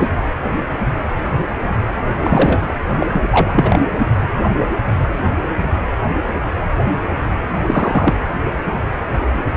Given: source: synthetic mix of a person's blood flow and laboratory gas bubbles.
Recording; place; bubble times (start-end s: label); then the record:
Doppler ultrasound of blood flow; precordium
0.00-0.09 s: bubbles
2.23-2.75 s: bubbles
3.00-3.08 s: bubbles
3.13-3.21 s: bubbles
3.30-3.80 s: bubbles
7.66-8.15 s: bubbles
From the record:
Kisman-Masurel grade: 223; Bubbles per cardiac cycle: several, 3 to 8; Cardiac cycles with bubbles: 10 to 50%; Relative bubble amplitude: loud (0.450 to 0.775); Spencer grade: 2 (many but less than half of the cardiac periods contain bubble signals, singularly or in groups); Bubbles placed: anywhere in the cardiac cycle